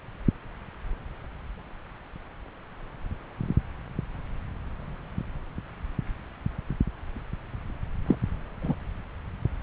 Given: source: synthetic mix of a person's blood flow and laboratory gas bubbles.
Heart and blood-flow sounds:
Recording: Doppler ultrasound of blood flow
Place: subclavian vein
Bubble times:
8.07-8.15 s: bubbles
8.62-8.75 s: bubbles
From the record:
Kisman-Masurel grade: 113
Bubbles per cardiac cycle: 1 to 2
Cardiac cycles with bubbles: 1 to 10%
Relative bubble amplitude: loud (0.450 to 0.775)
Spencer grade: 1 (occasional bubble signal discernible with the cardiac motion signal, with majority of cardiac periods free of bubbles)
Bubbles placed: anywhere in the cardiac cycle

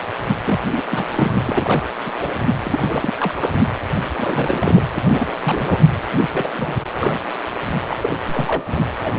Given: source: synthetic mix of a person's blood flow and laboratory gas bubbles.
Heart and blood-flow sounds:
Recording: Doppler ultrasound of blood flow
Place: precordium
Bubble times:
0.44-0.60 s: bubbles
0.66-0.85 s: bubbles
0.90-1.39 s: bubbles
1.45-1.86 s: bubbles
2.05-2.14 s: bubbles
2.19-2.31 s: bubbles
2.63-3.52 s: bubbles
4.17-4.84 s: bubbles
4.95-4.98 s: bubbles
5.02-5.38 s: bubbles
5.45-5.85 s: bubbles
6.21-6.48 s: bubbles
6.52-6.75 s: bubbles
6.85-6.89 s: bubbles
6.96-7.19 s: bubbles
7.88-7.97 s: bubbles
8.02-8.19 s: bubbles
8.28-8.87 s: bubbles
8.98-9.15 s: bubbles
From the record:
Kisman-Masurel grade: 342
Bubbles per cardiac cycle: rolling drumbeat, 9 or more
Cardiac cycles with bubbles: 100%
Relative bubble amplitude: moderate (0.250 to 0.450)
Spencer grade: 3 (all of the cardiac periods contain showers or single bubble signals, but not dominating or overriding the cardiac motion signals)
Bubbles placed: anywhere in the cardiac cycle

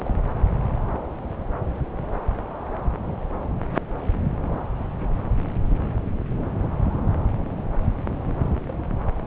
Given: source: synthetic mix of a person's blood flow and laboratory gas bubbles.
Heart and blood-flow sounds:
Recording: Doppler ultrasound of blood flow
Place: subclavian vein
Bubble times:
0.00-0.13 s: bubbles
From the record:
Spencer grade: 2 (many but less than half of the cardiac periods contain bubble signals, singularly or in groups)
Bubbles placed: anywhere in the cardiac cycle

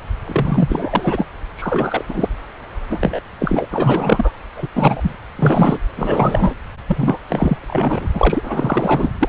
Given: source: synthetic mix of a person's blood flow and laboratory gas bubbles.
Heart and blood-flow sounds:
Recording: Doppler ultrasound of blood flow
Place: subclavian vein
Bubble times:
0.27-1.26 s: bubbles
1.57-2.05 s: bubbles
2.08-2.28 s: bubbles
2.90-3.20 s: bubbles
3.39-3.67 s: bubbles
3.71-4.32 s: bubbles
4.56-4.67 s: bubbles
4.74-5.15 s: bubbles
5.36-5.79 s: bubbles
5.96-6.54 s: bubbles
6.87-7.19 s: bubbles
7.29-7.58 s: bubbles
7.62-7.65 s: bubbles
7.67-8.08 s: bubbles
8.13-8.40 s: bubbles
8.43-9.11 s: bubbles
9.20-9.29 s: bubbles
From the record:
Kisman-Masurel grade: 343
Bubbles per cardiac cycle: rolling drumbeat, 9 or more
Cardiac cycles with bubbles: 100%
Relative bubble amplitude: loud (0.450 to 0.775)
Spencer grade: 3 (all of the cardiac periods contain showers or single bubble signals, but not dominating or overriding the cardiac motion signals)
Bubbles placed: anywhere in the cardiac cycle

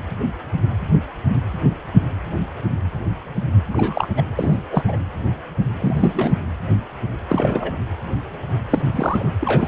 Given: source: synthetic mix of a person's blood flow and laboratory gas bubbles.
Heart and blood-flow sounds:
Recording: Doppler ultrasound of blood flow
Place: precordium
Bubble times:
3.73-4.08 s: bubbles
4.17-4.25 s: bubbles
4.36-4.62 s: bubbles
4.71-4.83 s: bubbles
4.88-4.96 s: bubbles
5.80-6.35 s: bubbles
7.26-7.72 s: bubbles
8.70-8.82 s: bubbles
8.91-9.32 s: bubbles
9.40-9.68 s: bubbles
From the record:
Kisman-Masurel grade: 222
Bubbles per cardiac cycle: several, 3 to 8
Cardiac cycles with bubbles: 10 to 50%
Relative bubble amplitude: moderate (0.250 to 0.450)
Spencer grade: 2 (many but less than half of the cardiac periods contain bubble signals, singularly or in groups)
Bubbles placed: anywhere in the cardiac cycle

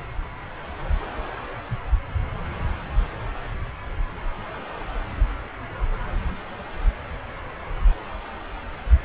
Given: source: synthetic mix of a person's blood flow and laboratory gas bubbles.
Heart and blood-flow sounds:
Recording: Doppler ultrasound of blood flow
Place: subclavian vein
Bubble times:
no bubbles
From the record:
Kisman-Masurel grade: 000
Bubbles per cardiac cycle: 0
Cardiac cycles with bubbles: 0%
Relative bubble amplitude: no bubbles discernible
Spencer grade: 0 (complete lack of bubble signals)

